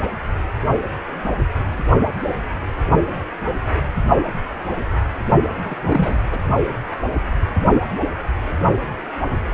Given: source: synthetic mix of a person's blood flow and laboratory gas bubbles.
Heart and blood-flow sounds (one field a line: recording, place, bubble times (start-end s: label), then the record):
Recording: Doppler ultrasound of blood flow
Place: precordium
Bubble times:
5.46-6.24 s: bubbles
6.31-6.39 s: bubbles
From the record:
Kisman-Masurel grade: 222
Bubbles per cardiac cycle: several, 3 to 8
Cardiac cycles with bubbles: 10 to 50%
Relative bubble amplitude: moderate (0.250 to 0.450)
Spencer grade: 2 (many but less than half of the cardiac periods contain bubble signals, singularly or in groups)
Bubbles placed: only in the low amplitude regions of the cardiac cycle